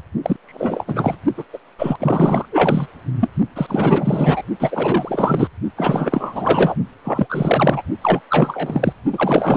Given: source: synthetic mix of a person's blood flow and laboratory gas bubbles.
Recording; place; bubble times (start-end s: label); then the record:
Doppler ultrasound of blood flow; precordium
0.23-0.36 s: bubbles
0.46-0.84 s: bubbles
0.86-1.16 s: bubbles
1.37-1.44 s: bubbles
1.53-1.58 s: bubbles
1.78-2.46 s: bubbles
2.52-2.87 s: bubbles
3.21-3.29 s: bubbles
3.56-4.42 s: bubbles
4.60-5.49 s: bubbles
5.76-6.76 s: bubbles
7.04-7.83 s: bubbles
8.01-8.21 s: bubbles
8.29-8.93 s: bubbles
9.12-9.57 s: bubbles
From the record:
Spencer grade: 4 (maximum detectable bubble signal sounding continuously throughout systole and diastole of every cardiac period, and overriding the amplitude of the normal cardiac signals); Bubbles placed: only in the low amplitude regions of the cardiac cycle